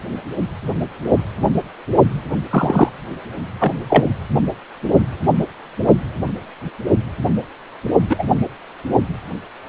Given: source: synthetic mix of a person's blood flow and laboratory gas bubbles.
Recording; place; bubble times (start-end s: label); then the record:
Doppler ultrasound of blood flow; precordium
2.50-2.89 s: bubbles
3.60-3.71 s: bubbles
3.89-4.04 s: bubbles
8.09-8.24 s: bubbles
From the record:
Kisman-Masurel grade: 123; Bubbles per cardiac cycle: 1 to 2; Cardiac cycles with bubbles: 10 to 50%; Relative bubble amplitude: loud (0.450 to 0.775); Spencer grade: 2 (many but less than half of the cardiac periods contain bubble signals, singularly or in groups); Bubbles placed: only in the low amplitude regions of the cardiac cycle